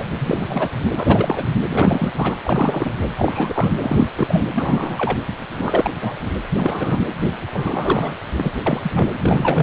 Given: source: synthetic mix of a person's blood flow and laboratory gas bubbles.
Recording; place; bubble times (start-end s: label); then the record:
Doppler ultrasound of blood flow; precordium
0.00-0.05 s: bubbles
0.20-0.70 s: bubbles
0.95-1.48 s: bubbles
1.71-2.13 s: bubbles
2.16-2.35 s: bubbles
2.43-2.94 s: bubbles
3.17-3.74 s: bubbles
3.81-4.10 s: bubbles
4.18-4.44 s: bubbles
4.52-5.17 s: bubbles
5.58-5.90 s: bubbles
6.01-6.16 s: bubbles
6.23-6.36 s: bubbles
6.44-6.46 s: bubbles
6.51-7.04 s: bubbles
7.54-8.16 s: bubbles
8.37-8.52 s: bubbles
8.66-9.13 s: bubbles
9.17-9.63 s: bubbles
From the record:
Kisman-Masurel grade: 342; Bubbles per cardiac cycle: rolling drumbeat, 9 or more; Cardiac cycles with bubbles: 100%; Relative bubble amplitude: moderate (0.250 to 0.450); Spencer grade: 3 (all of the cardiac periods contain showers or single bubble signals, but not dominating or overriding the cardiac motion signals); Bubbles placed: anywhere in the cardiac cycle